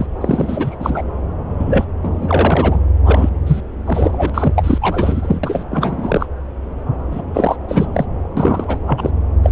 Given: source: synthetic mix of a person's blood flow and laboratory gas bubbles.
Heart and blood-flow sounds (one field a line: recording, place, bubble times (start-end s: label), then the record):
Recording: Doppler ultrasound of blood flow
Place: subclavian vein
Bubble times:
0.00-0.06 s: bubbles
0.21-0.77 s: bubbles
0.79-1.04 s: bubbles
1.59-1.85 s: bubbles
2.02-2.81 s: bubbles
3.04-3.29 s: bubbles
3.46-3.60 s: bubbles
3.85-4.30 s: bubbles
4.34-4.53 s: bubbles
4.56-4.78 s: bubbles
4.81-5.40 s: bubbles
5.43-5.66 s: bubbles
5.71-6.27 s: bubbles
7.11-7.22 s: bubbles
7.33-7.56 s: bubbles
7.68-7.87 s: bubbles
7.94-8.06 s: bubbles
8.37-8.79 s: bubbles
8.87-9.10 s: bubbles
9.43-9.51 s: bubbles
From the record:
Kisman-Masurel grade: 333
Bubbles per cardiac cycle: rolling drumbeat, 9 or more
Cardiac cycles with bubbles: 50 to 99%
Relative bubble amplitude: loud (0.450 to 0.775)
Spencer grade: 3 (all of the cardiac periods contain showers or single bubble signals, but not dominating or overriding the cardiac motion signals)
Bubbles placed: anywhere in the cardiac cycle